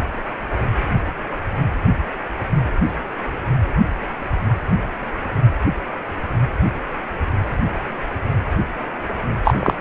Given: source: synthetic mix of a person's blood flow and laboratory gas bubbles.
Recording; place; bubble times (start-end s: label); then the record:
Doppler ultrasound of blood flow; precordium
9.44-9.54 s: bubbles
9.60-9.74 s: bubbles
From the record:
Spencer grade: 1 (occasional bubble signal discernible with the cardiac motion signal, with majority of cardiac periods free of bubbles); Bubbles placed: anywhere in the cardiac cycle